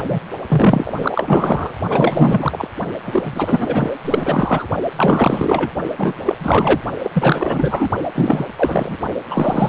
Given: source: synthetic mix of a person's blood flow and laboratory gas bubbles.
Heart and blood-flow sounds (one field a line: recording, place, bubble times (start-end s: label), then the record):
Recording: Doppler ultrasound of blood flow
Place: precordium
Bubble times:
0.00-0.19 s: bubbles
0.48-1.75 s: bubbles
1.88-2.68 s: bubbles
3.04-3.91 s: bubbles
4.04-4.67 s: bubbles
4.96-5.71 s: bubbles
5.97-6.21 s: bubbles
6.25-6.35 s: bubbles
6.39-6.81 s: bubbles
7.03-7.11 s: bubbles
7.13-7.89 s: bubbles
8.15-8.46 s: bubbles
8.56-8.96 s: bubbles
9.29-9.68 s: bubbles
From the record:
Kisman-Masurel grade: 444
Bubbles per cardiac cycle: continuous sound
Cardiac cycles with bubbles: 100%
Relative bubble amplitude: maximal (0.775 to 0.999)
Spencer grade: 4 (maximum detectable bubble signal sounding continuously throughout systole and diastole of every cardiac period, and overriding the amplitude of the normal cardiac signals)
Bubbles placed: only in the low amplitude regions of the cardiac cycle